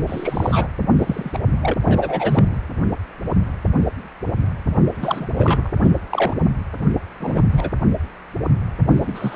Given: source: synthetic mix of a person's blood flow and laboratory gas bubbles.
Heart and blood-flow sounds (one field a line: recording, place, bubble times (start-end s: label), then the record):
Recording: Doppler ultrasound of blood flow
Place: precordium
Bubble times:
0.07-0.68 s: bubbles
0.99-1.39 s: bubbles
1.62-1.74 s: bubbles
1.84-2.57 s: bubbles
4.95-5.27 s: bubbles
5.37-5.71 s: bubbles
5.80-5.90 s: bubbles
6.11-6.34 s: bubbles
7.20-7.44 s: bubbles
7.51-7.70 s: bubbles
8.94-9.36 s: bubbles
From the record:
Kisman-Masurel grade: 232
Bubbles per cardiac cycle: several, 3 to 8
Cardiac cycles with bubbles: 50 to 99%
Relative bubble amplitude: moderate (0.250 to 0.450)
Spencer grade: 3 (all of the cardiac periods contain showers or single bubble signals, but not dominating or overriding the cardiac motion signals)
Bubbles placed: anywhere in the cardiac cycle